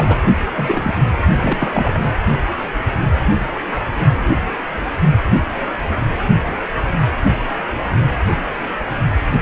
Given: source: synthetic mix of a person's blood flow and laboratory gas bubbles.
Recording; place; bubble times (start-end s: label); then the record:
Doppler ultrasound of blood flow; precordium
0.00-0.23 s: bubbles
0.56-0.94 s: bubbles
1.42-2.00 s: bubbles
From the record:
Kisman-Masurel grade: 222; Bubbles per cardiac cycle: several, 3 to 8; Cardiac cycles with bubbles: 10 to 50%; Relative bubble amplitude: moderate (0.250 to 0.450); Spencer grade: 2 (many but less than half of the cardiac periods contain bubble signals, singularly or in groups); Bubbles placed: only in the low amplitude regions of the cardiac cycle